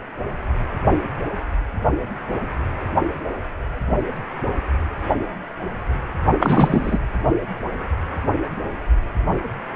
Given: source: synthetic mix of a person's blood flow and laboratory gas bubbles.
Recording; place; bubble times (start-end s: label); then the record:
Doppler ultrasound of blood flow; precordium
6.40-6.99 s: bubbles
From the record:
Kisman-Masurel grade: 213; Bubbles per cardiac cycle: several, 3 to 8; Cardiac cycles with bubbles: 1 to 10%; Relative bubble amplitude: loud (0.450 to 0.775); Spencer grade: 1 (occasional bubble signal discernible with the cardiac motion signal, with majority of cardiac periods free of bubbles); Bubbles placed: only in the low amplitude regions of the cardiac cycle